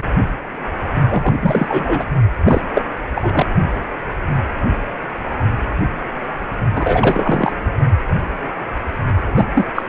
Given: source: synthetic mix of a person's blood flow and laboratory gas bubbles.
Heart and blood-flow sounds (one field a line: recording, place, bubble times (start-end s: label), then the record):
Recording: Doppler ultrasound of blood flow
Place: precordium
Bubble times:
1.09-1.33 s: bubbles
1.42-2.04 s: bubbles
2.44-2.61 s: bubbles
2.75-2.83 s: bubbles
3.15-3.46 s: bubbles
6.74-7.53 s: bubbles
9.29-9.67 s: bubbles
9.76-9.83 s: bubbles
From the record:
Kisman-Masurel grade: 333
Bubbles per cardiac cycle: rolling drumbeat, 9 or more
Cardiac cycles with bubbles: 50 to 99%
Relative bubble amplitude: loud (0.450 to 0.775)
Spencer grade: 3 (all of the cardiac periods contain showers or single bubble signals, but not dominating or overriding the cardiac motion signals)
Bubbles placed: only in the low amplitude regions of the cardiac cycle